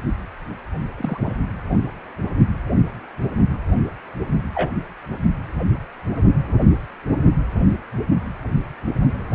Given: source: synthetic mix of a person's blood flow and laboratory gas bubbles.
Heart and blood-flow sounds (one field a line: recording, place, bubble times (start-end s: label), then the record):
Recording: Doppler ultrasound of blood flow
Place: precordium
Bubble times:
0.98-1.33 s: bubbles
4.54-4.71 s: bubbles
From the record:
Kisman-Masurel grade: 122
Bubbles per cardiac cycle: 1 to 2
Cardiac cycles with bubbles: 10 to 50%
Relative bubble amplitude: moderate (0.250 to 0.450)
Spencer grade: 2 (many but less than half of the cardiac periods contain bubble signals, singularly or in groups)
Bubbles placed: only in the low amplitude regions of the cardiac cycle